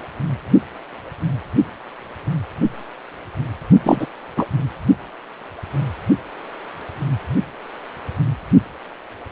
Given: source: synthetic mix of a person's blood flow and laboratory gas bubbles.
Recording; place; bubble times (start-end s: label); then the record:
Doppler ultrasound of blood flow; precordium
3.83-4.08 s: bubbles
4.37-4.47 s: bubbles
From the record:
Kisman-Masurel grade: 213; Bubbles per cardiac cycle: several, 3 to 8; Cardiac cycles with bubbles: 1 to 10%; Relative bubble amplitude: loud (0.450 to 0.775); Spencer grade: 1 (occasional bubble signal discernible with the cardiac motion signal, with majority of cardiac periods free of bubbles); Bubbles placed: only in the low amplitude regions of the cardiac cycle